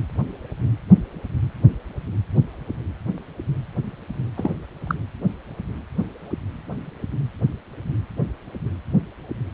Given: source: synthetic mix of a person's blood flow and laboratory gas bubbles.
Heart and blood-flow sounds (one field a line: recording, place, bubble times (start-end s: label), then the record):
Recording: Doppler ultrasound of blood flow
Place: precordium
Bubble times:
4.37-4.51 s: bubbles
4.87-4.95 s: bubbles
From the record:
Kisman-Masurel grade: 112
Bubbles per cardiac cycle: 1 to 2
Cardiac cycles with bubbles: 1 to 10%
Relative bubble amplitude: moderate (0.250 to 0.450)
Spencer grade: 1 (occasional bubble signal discernible with the cardiac motion signal, with majority of cardiac periods free of bubbles)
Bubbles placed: anywhere in the cardiac cycle